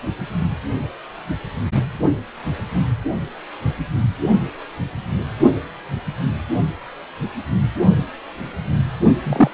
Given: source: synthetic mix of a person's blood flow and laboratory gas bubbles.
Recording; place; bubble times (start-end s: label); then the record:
Doppler ultrasound of blood flow; precordium
9.23-9.50 s: bubbles
From the record:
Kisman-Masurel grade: 223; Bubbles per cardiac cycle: several, 3 to 8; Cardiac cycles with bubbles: 10 to 50%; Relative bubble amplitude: loud (0.450 to 0.775); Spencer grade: 2 (many but less than half of the cardiac periods contain bubble signals, singularly or in groups); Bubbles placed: only in the low amplitude regions of the cardiac cycle